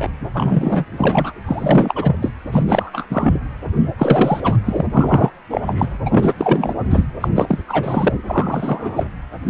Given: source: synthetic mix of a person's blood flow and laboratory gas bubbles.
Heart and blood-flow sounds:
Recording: Doppler ultrasound of blood flow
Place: precordium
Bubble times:
0.00-0.10 s: bubbles
0.33-0.85 s: bubbles
0.91-1.33 s: bubbles
1.46-2.17 s: bubbles
2.22-2.33 s: bubbles
2.52-2.63 s: bubbles
2.66-3.06 s: bubbles
3.10-3.40 s: bubbles
3.98-4.57 s: bubbles
4.65-4.86 s: bubbles
4.93-5.31 s: bubbles
5.51-5.98 s: bubbles
6.05-6.34 s: bubbles
6.38-6.75 s: bubbles
6.88-7.06 s: bubbles
7.21-7.28 s: bubbles
7.35-7.60 s: bubbles
7.67-8.14 s: bubbles
8.28-9.09 s: bubbles
9.46-9.50 s: bubbles
From the record:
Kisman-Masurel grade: 343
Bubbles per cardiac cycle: rolling drumbeat, 9 or more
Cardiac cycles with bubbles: 100%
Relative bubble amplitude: loud (0.450 to 0.775)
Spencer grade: 3 (all of the cardiac periods contain showers or single bubble signals, but not dominating or overriding the cardiac motion signals)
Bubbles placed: anywhere in the cardiac cycle

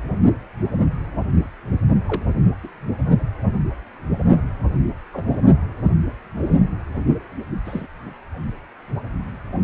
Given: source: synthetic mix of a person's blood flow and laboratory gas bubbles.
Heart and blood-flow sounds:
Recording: Doppler ultrasound of blood flow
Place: precordium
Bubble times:
2.07-2.22 s: bubbles
2.63-2.69 s: bubbles
4.87-4.92 s: bubbles
5.13-5.38 s: bubbles
7.65-7.87 s: bubbles
From the record:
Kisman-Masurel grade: 122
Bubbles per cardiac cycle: 1 to 2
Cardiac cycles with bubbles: 10 to 50%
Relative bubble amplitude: moderate (0.250 to 0.450)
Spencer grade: 2 (many but less than half of the cardiac periods contain bubble signals, singularly or in groups)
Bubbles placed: only in the low amplitude regions of the cardiac cycle

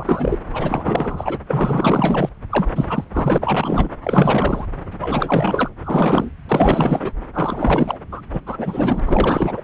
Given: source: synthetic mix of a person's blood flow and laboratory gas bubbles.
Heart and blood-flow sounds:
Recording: Doppler ultrasound of blood flow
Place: subclavian vein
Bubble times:
0.00-0.38 s: bubbles
0.53-1.39 s: bubbles
1.47-2.29 s: bubbles
2.51-2.67 s: bubbles
2.76-3.04 s: bubbles
3.12-3.38 s: bubbles
3.41-3.89 s: bubbles
4.04-4.67 s: bubbles
4.99-5.69 s: bubbles
5.84-6.30 s: bubbles
6.48-7.12 s: bubbles
7.33-7.98 s: bubbles
8.12-8.21 s: bubbles
8.33-8.41 s: bubbles
8.46-9.00 s: bubbles
9.05-9.61 s: bubbles
From the record:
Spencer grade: 4 (maximum detectable bubble signal sounding continuously throughout systole and diastole of every cardiac period, and overriding the amplitude of the normal cardiac signals)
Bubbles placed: anywhere in the cardiac cycle

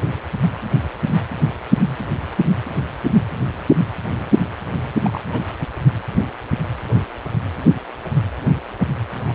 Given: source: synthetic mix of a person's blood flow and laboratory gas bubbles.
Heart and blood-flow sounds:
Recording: Doppler ultrasound of blood flow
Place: precordium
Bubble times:
5.03-5.21 s: bubbles
5.32-5.41 s: bubbles
9.29-9.32 s: bubbles
From the record:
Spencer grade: 1 (occasional bubble signal discernible with the cardiac motion signal, with majority of cardiac periods free of bubbles)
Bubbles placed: anywhere in the cardiac cycle

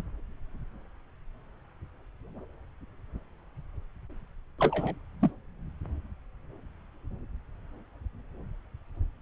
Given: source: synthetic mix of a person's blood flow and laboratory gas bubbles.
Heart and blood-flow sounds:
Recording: Doppler ultrasound of blood flow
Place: subclavian vein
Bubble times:
4.58-4.94 s: bubbles
5.21-5.30 s: bubbles
From the record:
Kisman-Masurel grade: 211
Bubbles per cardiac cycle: several, 3 to 8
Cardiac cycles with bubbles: 1 to 10%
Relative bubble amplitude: barely perceptible (0.100 to 0.250)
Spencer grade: 1 (occasional bubble signal discernible with the cardiac motion signal, with majority of cardiac periods free of bubbles)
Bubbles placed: anywhere in the cardiac cycle

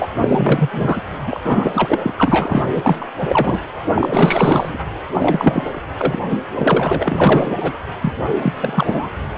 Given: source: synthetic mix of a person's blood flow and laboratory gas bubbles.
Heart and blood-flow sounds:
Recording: Doppler ultrasound of blood flow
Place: precordium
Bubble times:
0.00-0.08 s: bubbles
0.14-1.01 s: bubbles
1.26-1.41 s: bubbles
1.44-1.99 s: bubbles
2.03-2.14 s: bubbles
2.17-2.68 s: bubbles
2.75-3.08 s: bubbles
3.20-3.60 s: bubbles
3.95-4.78 s: bubbles
5.12-5.83 s: bubbles
5.97-6.22 s: bubbles
6.29-6.38 s: bubbles
6.54-7.73 s: bubbles
8.02-8.13 s: bubbles
8.34-8.53 s: bubbles
8.55-9.10 s: bubbles
From the record:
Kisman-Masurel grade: 444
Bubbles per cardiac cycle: continuous sound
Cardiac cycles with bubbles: 100%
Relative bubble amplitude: maximal (0.775 to 0.999)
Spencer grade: 4 (maximum detectable bubble signal sounding continuously throughout systole and diastole of every cardiac period, and overriding the amplitude of the normal cardiac signals)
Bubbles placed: anywhere in the cardiac cycle

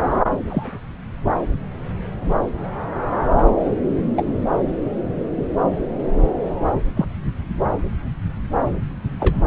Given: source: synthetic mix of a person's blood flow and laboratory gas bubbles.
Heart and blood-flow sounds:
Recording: Doppler ultrasound of blood flow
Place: subclavian vein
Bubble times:
0.30-0.38 s: bubbles
0.47-0.85 s: bubbles
4.17-4.25 s: bubbles
6.96-7.05 s: bubbles
9.20-9.35 s: bubbles
From the record:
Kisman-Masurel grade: 122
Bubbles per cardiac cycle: 1 to 2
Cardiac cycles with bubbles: 10 to 50%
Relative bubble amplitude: moderate (0.250 to 0.450)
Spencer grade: 2 (many but less than half of the cardiac periods contain bubble signals, singularly or in groups)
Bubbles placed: anywhere in the cardiac cycle

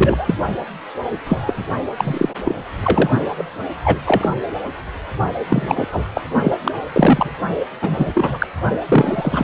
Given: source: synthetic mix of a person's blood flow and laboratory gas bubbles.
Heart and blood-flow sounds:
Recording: Doppler ultrasound of blood flow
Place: precordium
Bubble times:
0.00-0.34 s: bubbles
1.25-1.64 s: bubbles
1.97-2.29 s: bubbles
2.44-2.56 s: bubbles
2.83-3.10 s: bubbles
3.38-3.45 s: bubbles
3.84-3.99 s: bubbles
4.06-4.29 s: bubbles
5.50-5.88 s: bubbles
5.92-6.05 s: bubbles
6.14-6.21 s: bubbles
6.44-6.53 s: bubbles
6.64-6.71 s: bubbles
6.92-7.31 s: bubbles
7.81-8.11 s: bubbles
8.14-8.47 s: bubbles
8.88-9.44 s: bubbles
From the record:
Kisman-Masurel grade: 243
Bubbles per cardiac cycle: several, 3 to 8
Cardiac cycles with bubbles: 100%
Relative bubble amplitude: loud (0.450 to 0.775)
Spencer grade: 3 (all of the cardiac periods contain showers or single bubble signals, but not dominating or overriding the cardiac motion signals)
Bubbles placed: only in the low amplitude regions of the cardiac cycle

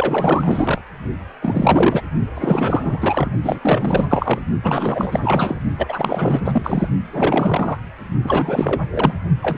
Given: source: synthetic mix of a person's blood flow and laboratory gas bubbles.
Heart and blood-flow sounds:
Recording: Doppler ultrasound of blood flow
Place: precordium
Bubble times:
0.00-0.82 s: bubbles
1.42-2.01 s: bubbles
2.35-3.30 s: bubbles
3.43-3.59 s: bubbles
3.61-4.45 s: bubbles
4.62-5.61 s: bubbles
5.77-6.42 s: bubbles
6.45-6.88 s: bubbles
7.12-7.78 s: bubbles
8.24-8.82 s: bubbles
8.90-9.14 s: bubbles
9.42-9.58 s: bubbles
From the record:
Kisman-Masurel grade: 444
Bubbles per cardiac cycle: continuous sound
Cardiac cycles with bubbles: 100%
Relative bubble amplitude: maximal (0.775 to 0.999)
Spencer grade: 4 (maximum detectable bubble signal sounding continuously throughout systole and diastole of every cardiac period, and overriding the amplitude of the normal cardiac signals)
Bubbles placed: only in the low amplitude regions of the cardiac cycle

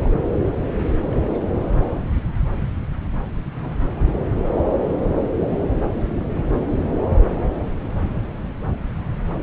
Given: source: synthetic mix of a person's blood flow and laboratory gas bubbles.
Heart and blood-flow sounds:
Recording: Doppler ultrasound of blood flow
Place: subclavian vein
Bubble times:
0.03-0.09 s: bubbles
0.74-0.87 s: bubbles
1.10-1.42 s: bubbles
3.55-3.77 s: bubbles
6.31-6.44 s: bubbles
From the record:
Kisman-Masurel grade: 121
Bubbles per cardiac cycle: 1 to 2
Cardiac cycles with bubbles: 10 to 50%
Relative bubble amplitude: barely perceptible (0.100 to 0.250)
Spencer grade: 2 (many but less than half of the cardiac periods contain bubble signals, singularly or in groups)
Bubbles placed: anywhere in the cardiac cycle

